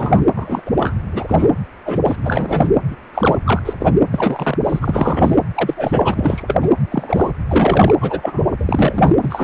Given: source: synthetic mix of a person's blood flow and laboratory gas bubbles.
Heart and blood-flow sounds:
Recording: Doppler ultrasound of blood flow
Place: precordium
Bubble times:
0.00-0.21 s: bubbles
0.36-0.62 s: bubbles
0.65-0.71 s: bubbles
0.79-0.95 s: bubbles
1.12-1.50 s: bubbles
1.85-2.00 s: bubbles
2.05-2.16 s: bubbles
2.23-2.69 s: bubbles
2.88-2.96 s: bubbles
3.14-3.39 s: bubbles
3.44-3.63 s: bubbles
3.65-3.73 s: bubbles
3.79-3.94 s: bubbles
4.11-4.57 s: bubbles
4.64-5.37 s: bubbles
5.54-5.74 s: bubbles
5.76-6.42 s: bubbles
6.47-6.56 s: bubbles
6.60-6.69 s: bubbles
6.90-7.31 s: bubbles
7.47-7.94 s: bubbles
8.00-8.44 s: bubbles
8.59-9.14 s: bubbles
9.22-9.44 s: bubbles
From the record:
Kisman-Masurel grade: 243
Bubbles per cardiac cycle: several, 3 to 8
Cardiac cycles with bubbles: 100%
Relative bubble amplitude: loud (0.450 to 0.775)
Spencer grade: 3 (all of the cardiac periods contain showers or single bubble signals, but not dominating or overriding the cardiac motion signals)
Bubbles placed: anywhere in the cardiac cycle

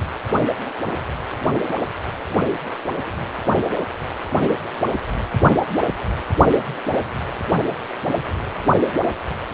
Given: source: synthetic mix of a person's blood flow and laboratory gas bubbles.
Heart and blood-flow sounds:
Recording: Doppler ultrasound of blood flow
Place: precordium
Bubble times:
no bubbles
From the record:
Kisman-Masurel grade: 000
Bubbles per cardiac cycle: 0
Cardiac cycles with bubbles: 0%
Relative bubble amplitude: no bubbles discernible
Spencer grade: 0 (complete lack of bubble signals)

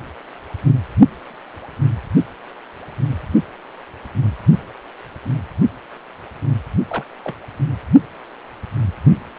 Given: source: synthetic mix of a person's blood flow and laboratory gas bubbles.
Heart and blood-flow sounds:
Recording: Doppler ultrasound of blood flow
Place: precordium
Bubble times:
6.88-7.05 s: bubbles
7.24-7.38 s: bubbles
From the record:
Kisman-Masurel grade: 221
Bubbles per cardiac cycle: several, 3 to 8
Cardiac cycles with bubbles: 10 to 50%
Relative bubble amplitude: barely perceptible (0.100 to 0.250)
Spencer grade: 2 (many but less than half of the cardiac periods contain bubble signals, singularly or in groups)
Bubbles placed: only in the low amplitude regions of the cardiac cycle

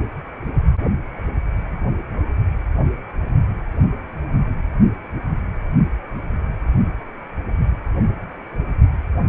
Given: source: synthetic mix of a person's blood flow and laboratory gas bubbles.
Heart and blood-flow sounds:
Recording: Doppler ultrasound of blood flow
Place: precordium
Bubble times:
no bubbles
From the record:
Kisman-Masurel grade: 000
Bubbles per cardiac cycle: 0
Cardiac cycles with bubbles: 0%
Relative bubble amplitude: no bubbles discernible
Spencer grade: 0 (complete lack of bubble signals)

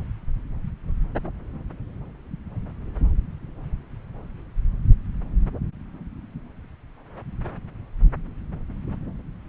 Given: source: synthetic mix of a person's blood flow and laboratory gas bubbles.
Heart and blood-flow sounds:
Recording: Doppler ultrasound of blood flow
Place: subclavian vein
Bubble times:
no bubbles
From the record:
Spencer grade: 0 (complete lack of bubble signals)

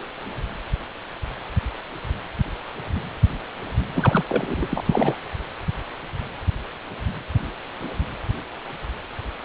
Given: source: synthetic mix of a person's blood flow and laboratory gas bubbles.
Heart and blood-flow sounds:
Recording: Doppler ultrasound of blood flow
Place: precordium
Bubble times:
3.95-4.24 s: bubbles
4.29-4.67 s: bubbles
4.71-5.20 s: bubbles
From the record:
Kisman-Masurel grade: 222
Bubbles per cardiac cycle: several, 3 to 8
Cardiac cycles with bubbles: 10 to 50%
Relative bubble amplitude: moderate (0.250 to 0.450)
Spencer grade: 2 (many but less than half of the cardiac periods contain bubble signals, singularly or in groups)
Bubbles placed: anywhere in the cardiac cycle

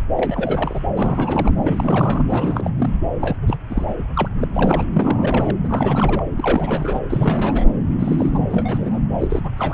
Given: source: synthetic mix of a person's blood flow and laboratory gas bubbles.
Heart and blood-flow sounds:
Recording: Doppler ultrasound of blood flow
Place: subclavian vein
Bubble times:
0.17-0.80 s: bubbles
0.97-1.53 s: bubbles
1.62-2.24 s: bubbles
2.29-2.70 s: bubbles
2.77-2.90 s: bubbles
3.20-3.37 s: bubbles
3.41-3.57 s: bubbles
3.70-3.94 s: bubbles
3.98-4.03 s: bubbles
4.14-4.28 s: bubbles
4.40-4.47 s: bubbles
4.53-4.83 s: bubbles
4.92-5.57 s: bubbles
5.63-6.24 s: bubbles
6.35-7.00 s: bubbles
7.09-7.65 s: bubbles
7.99-8.43 s: bubbles
8.50-9.01 s: bubbles
9.19-9.51 s: bubbles
9.57-9.74 s: bubbles
From the record:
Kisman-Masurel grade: 342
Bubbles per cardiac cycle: rolling drumbeat, 9 or more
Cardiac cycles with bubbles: 100%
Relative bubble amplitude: moderate (0.250 to 0.450)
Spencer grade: 3 (all of the cardiac periods contain showers or single bubble signals, but not dominating or overriding the cardiac motion signals)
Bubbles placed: anywhere in the cardiac cycle

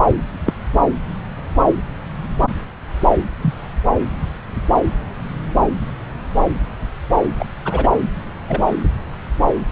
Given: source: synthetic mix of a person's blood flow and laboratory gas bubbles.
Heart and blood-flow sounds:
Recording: Doppler ultrasound of blood flow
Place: subclavian vein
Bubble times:
0.46-0.53 s: bubbles
2.42-2.48 s: bubbles
3.41-3.53 s: bubbles
7.38-7.45 s: bubbles
7.64-7.90 s: bubbles
8.48-8.63 s: bubbles
From the record:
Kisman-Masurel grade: 123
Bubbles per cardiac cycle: 1 to 2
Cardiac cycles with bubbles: 10 to 50%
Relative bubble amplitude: loud (0.450 to 0.775)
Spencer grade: 2 (many but less than half of the cardiac periods contain bubble signals, singularly or in groups)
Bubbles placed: anywhere in the cardiac cycle

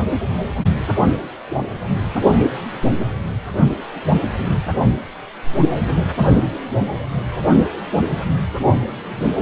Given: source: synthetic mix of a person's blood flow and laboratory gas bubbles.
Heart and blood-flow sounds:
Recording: Doppler ultrasound of blood flow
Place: precordium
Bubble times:
1.50-1.61 s: bubbles
From the record:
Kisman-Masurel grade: 112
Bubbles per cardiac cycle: 1 to 2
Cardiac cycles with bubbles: 1 to 10%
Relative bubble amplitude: moderate (0.250 to 0.450)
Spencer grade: 1 (occasional bubble signal discernible with the cardiac motion signal, with majority of cardiac periods free of bubbles)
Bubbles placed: only in the low amplitude regions of the cardiac cycle

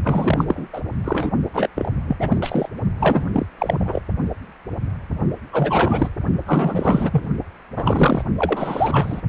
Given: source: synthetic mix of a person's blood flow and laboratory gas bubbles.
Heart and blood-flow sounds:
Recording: Doppler ultrasound of blood flow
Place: precordium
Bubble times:
0.04-0.45 s: bubbles
0.47-0.67 s: bubbles
0.73-0.81 s: bubbles
1.04-1.31 s: bubbles
1.53-1.69 s: bubbles
1.75-1.92 s: bubbles
2.08-2.17 s: bubbles
2.19-2.38 s: bubbles
2.42-2.68 s: bubbles
3.00-3.46 s: bubbles
3.58-4.01 s: bubbles
5.51-6.08 s: bubbles
6.46-7.25 s: bubbles
7.76-8.23 s: bubbles
8.38-9.21 s: bubbles
From the record:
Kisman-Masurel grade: 333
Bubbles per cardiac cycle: rolling drumbeat, 9 or more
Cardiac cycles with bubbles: 50 to 99%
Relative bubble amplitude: loud (0.450 to 0.775)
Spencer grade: 3 (all of the cardiac periods contain showers or single bubble signals, but not dominating or overriding the cardiac motion signals)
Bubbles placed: only in the low amplitude regions of the cardiac cycle

